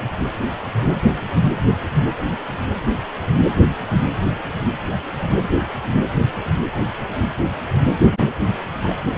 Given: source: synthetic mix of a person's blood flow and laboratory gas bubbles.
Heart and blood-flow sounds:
Doppler ultrasound of blood flow; precordium
1.95-2.03 s: bubbles
2.17-2.22 s: bubbles
8.03-8.12 s: bubbles
8.17-8.27 s: bubbles
8.84-8.95 s: bubbles
From the record:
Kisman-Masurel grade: 121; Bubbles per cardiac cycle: 1 to 2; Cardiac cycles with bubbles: 10 to 50%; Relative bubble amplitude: barely perceptible (0.100 to 0.250); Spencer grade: 2 (many but less than half of the cardiac periods contain bubble signals, singularly or in groups); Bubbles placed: anywhere in the cardiac cycle

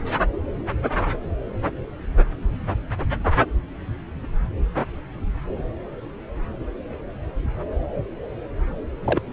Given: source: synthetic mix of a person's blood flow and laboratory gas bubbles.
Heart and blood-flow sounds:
Doppler ultrasound of blood flow; subclavian vein
9.04-9.21 s: bubbles
From the record:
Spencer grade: 1 (occasional bubble signal discernible with the cardiac motion signal, with majority of cardiac periods free of bubbles); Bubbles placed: anywhere in the cardiac cycle

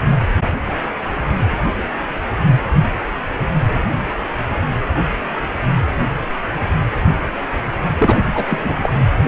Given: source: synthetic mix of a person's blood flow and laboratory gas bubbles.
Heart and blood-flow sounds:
Doppler ultrasound of blood flow; precordium
7.98-8.20 s: bubbles
8.34-8.45 s: bubbles
8.49-8.75 s: bubbles
8.81-8.92 s: bubbles
From the record:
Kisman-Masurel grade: 213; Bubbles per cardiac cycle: several, 3 to 8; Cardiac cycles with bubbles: 1 to 10%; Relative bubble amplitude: loud (0.450 to 0.775); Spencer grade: 1 (occasional bubble signal discernible with the cardiac motion signal, with majority of cardiac periods free of bubbles); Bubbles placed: anywhere in the cardiac cycle

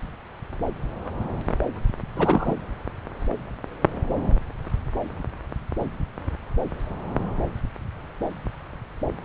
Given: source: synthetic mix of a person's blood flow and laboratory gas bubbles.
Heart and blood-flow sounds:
Doppler ultrasound of blood flow; subclavian vein
2.15-2.54 s: bubbles
From the record:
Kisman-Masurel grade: 112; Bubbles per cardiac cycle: 1 to 2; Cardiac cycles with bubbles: 1 to 10%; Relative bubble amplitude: moderate (0.250 to 0.450); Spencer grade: 1 (occasional bubble signal discernible with the cardiac motion signal, with majority of cardiac periods free of bubbles); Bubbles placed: anywhere in the cardiac cycle

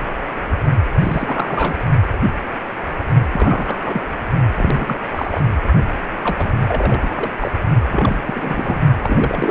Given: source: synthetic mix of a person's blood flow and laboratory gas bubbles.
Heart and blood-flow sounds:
Doppler ultrasound of blood flow; precordium
1.00-1.76 s: bubbles
1.79-1.85 s: bubbles
3.32-3.81 s: bubbles
3.84-4.01 s: bubbles
4.57-5.00 s: bubbles
5.15-5.41 s: bubbles
6.23-6.53 s: bubbles
6.68-7.29 s: bubbles
7.40-7.51 s: bubbles
7.90-8.19 s: bubbles
8.21-8.80 s: bubbles
9.04-9.51 s: bubbles
From the record:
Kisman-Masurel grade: 332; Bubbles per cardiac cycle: rolling drumbeat, 9 or more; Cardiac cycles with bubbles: 50 to 99%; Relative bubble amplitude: moderate (0.250 to 0.450); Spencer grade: 3 (all of the cardiac periods contain showers or single bubble signals, but not dominating or overriding the cardiac motion signals); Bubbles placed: only in the low amplitude regions of the cardiac cycle

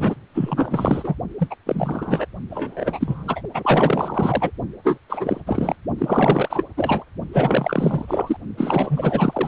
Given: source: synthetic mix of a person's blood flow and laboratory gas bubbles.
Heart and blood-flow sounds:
Doppler ultrasound of blood flow; precordium
0.00-0.15 s: bubbles
0.34-1.15 s: bubbles
1.38-1.55 s: bubbles
1.66-2.26 s: bubbles
2.50-3.42 s: bubbles
3.54-4.51 s: bubbles
4.83-4.98 s: bubbles
5.09-5.40 s: bubbles
5.46-5.75 s: bubbles
5.98-6.64 s: bubbles
6.77-7.04 s: bubbles
7.33-8.37 s: bubbles
8.57-9.48 s: bubbles
From the record:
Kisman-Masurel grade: 444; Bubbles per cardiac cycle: continuous sound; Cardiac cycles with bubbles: 100%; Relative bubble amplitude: maximal (0.775 to 0.999); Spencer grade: 4 (maximum detectable bubble signal sounding continuously throughout systole and diastole of every cardiac period, and overriding the amplitude of the normal cardiac signals); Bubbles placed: only in the low amplitude regions of the cardiac cycle

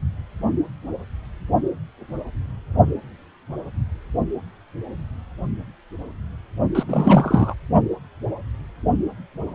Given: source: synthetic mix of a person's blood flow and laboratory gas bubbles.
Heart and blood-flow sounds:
Doppler ultrasound of blood flow; precordium
6.75-6.83 s: bubbles
6.88-7.54 s: bubbles
From the record:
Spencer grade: 1 (occasional bubble signal discernible with the cardiac motion signal, with majority of cardiac periods free of bubbles); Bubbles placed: only in the low amplitude regions of the cardiac cycle

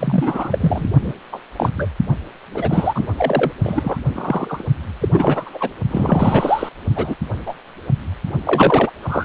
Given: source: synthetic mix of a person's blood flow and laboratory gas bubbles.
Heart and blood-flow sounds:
Doppler ultrasound of blood flow; precordium
0.00-0.90 s: bubbles
1.01-1.13 s: bubbles
1.32-1.40 s: bubbles
1.56-1.70 s: bubbles
1.77-1.88 s: bubbles
2.54-3.06 s: bubbles
3.17-3.52 s: bubbles
3.63-3.98 s: bubbles
4.12-4.64 s: bubbles
5.00-5.09 s: bubbles
5.12-5.71 s: bubbles
5.90-6.69 s: bubbles
6.95-7.14 s: bubbles
7.46-7.54 s: bubbles
8.43-8.91 s: bubbles
9.03-9.24 s: bubbles
From the record:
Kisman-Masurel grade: 243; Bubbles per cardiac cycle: several, 3 to 8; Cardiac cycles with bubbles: 100%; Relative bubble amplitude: loud (0.450 to 0.775); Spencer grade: 3 (all of the cardiac periods contain showers or single bubble signals, but not dominating or overriding the cardiac motion signals); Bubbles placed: only in the low amplitude regions of the cardiac cycle

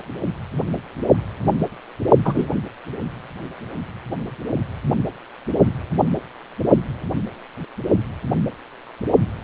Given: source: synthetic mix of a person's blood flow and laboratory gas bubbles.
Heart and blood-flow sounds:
Doppler ultrasound of blood flow; precordium
2.25-2.47 s: bubbles
From the record:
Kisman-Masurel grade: 113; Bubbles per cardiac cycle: 1 to 2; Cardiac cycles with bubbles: 1 to 10%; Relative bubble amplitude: loud (0.450 to 0.775); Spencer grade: 1 (occasional bubble signal discernible with the cardiac motion signal, with majority of cardiac periods free of bubbles); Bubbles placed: only in the low amplitude regions of the cardiac cycle

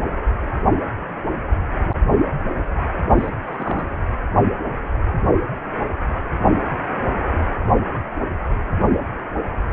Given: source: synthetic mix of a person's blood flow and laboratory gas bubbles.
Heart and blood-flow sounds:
Doppler ultrasound of blood flow; precordium
3.17-3.30 s: bubbles
3.45-3.87 s: bubbles
From the record:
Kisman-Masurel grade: 111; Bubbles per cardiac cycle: 1 to 2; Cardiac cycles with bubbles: 1 to 10%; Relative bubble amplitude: barely perceptible (0.100 to 0.250); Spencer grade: 1 (occasional bubble signal discernible with the cardiac motion signal, with majority of cardiac periods free of bubbles); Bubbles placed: anywhere in the cardiac cycle

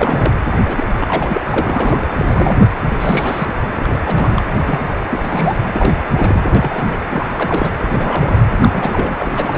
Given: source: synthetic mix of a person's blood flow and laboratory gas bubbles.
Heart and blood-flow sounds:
Doppler ultrasound of blood flow; precordium
0.00-0.33 s: bubbles
0.66-0.84 s: bubbles
0.95-1.44 s: bubbles
1.46-2.10 s: bubbles
2.17-2.25 s: bubbles
2.29-2.71 s: bubbles
2.87-3.48 s: bubbles
3.71-3.88 s: bubbles
3.92-3.99 s: bubbles
4.05-4.42 s: bubbles
4.61-4.79 s: bubbles
5.09-5.20 s: bubbles
5.24-5.57 s: bubbles
5.67-5.93 s: bubbles
6.14-6.41 s: bubbles
6.54-7.00 s: bubbles
7.10-7.70 s: bubbles
7.87-8.41 s: bubbles
8.59-9.16 s: bubbles
9.19-9.57 s: bubbles
From the record:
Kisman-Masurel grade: 342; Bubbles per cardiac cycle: rolling drumbeat, 9 or more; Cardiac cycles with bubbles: 100%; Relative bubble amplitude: moderate (0.250 to 0.450); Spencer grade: 3 (all of the cardiac periods contain showers or single bubble signals, but not dominating or overriding the cardiac motion signals); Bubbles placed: anywhere in the cardiac cycle

